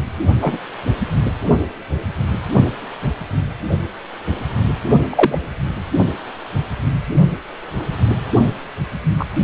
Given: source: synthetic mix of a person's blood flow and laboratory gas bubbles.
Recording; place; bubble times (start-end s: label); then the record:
Doppler ultrasound of blood flow; precordium
0.41-0.57 s: bubbles
5.09-5.39 s: bubbles
9.19-9.25 s: bubbles
From the record:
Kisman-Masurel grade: 123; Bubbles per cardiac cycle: 1 to 2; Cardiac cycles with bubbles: 10 to 50%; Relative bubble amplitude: loud (0.450 to 0.775); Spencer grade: 2 (many but less than half of the cardiac periods contain bubble signals, singularly or in groups); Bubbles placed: only in the low amplitude regions of the cardiac cycle